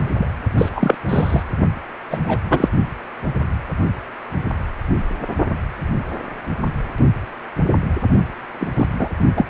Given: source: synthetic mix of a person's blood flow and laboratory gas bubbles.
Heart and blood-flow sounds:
Doppler ultrasound of blood flow; precordium
0.00-0.12 s: bubbles
0.17-0.27 s: bubbles
0.57-0.94 s: bubbles
1.08-1.44 s: bubbles
2.09-2.19 s: bubbles
2.23-2.38 s: bubbles
2.48-2.69 s: bubbles
8.60-8.66 s: bubbles
8.76-8.86 s: bubbles
8.98-9.08 s: bubbles
9.37-9.47 s: bubbles
From the record:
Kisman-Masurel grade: 233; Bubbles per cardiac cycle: several, 3 to 8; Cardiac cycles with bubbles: 50 to 99%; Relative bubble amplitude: loud (0.450 to 0.775); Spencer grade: 3 (all of the cardiac periods contain showers or single bubble signals, but not dominating or overriding the cardiac motion signals); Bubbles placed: only in the low amplitude regions of the cardiac cycle

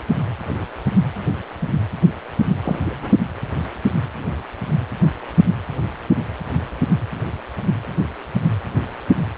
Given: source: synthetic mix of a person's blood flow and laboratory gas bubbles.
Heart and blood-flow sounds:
Doppler ultrasound of blood flow; precordium
2.62-2.79 s: bubbles
2.84-3.18 s: bubbles
From the record:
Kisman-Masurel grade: 112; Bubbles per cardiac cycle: 1 to 2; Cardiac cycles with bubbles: 1 to 10%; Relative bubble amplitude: moderate (0.250 to 0.450); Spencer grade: 1 (occasional bubble signal discernible with the cardiac motion signal, with majority of cardiac periods free of bubbles); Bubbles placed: anywhere in the cardiac cycle

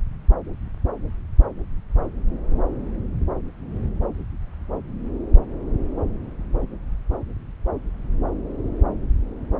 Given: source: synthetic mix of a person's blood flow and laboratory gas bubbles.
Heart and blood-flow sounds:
Doppler ultrasound of blood flow; subclavian vein
no bubbles
From the record:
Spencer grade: 0 (complete lack of bubble signals)

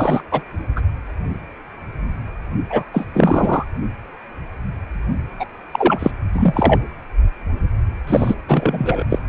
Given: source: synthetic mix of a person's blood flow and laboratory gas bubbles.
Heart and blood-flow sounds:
Doppler ultrasound of blood flow; precordium
0.00-0.22 s: bubbles
0.31-0.42 s: bubbles
0.75-0.81 s: bubbles
2.69-2.85 s: bubbles
2.94-3.07 s: bubbles
3.13-3.65 s: bubbles
5.39-5.46 s: bubbles
5.71-6.11 s: bubbles
6.33-6.82 s: bubbles
8.07-8.35 s: bubbles
8.48-9.04 s: bubbles
9.10-9.19 s: bubbles
From the record:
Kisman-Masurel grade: 333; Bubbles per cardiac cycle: rolling drumbeat, 9 or more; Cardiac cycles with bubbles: 50 to 99%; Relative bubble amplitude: loud (0.450 to 0.775); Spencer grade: 3 (all of the cardiac periods contain showers or single bubble signals, but not dominating or overriding the cardiac motion signals); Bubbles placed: anywhere in the cardiac cycle

